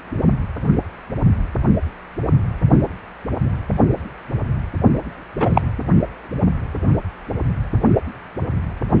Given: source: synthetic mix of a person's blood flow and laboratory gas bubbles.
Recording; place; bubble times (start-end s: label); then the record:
Doppler ultrasound of blood flow; precordium
5.39-5.62 s: bubbles
From the record:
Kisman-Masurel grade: 113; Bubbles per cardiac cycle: 1 to 2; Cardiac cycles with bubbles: 1 to 10%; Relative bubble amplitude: loud (0.450 to 0.775); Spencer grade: 1 (occasional bubble signal discernible with the cardiac motion signal, with majority of cardiac periods free of bubbles); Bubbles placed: only in the low amplitude regions of the cardiac cycle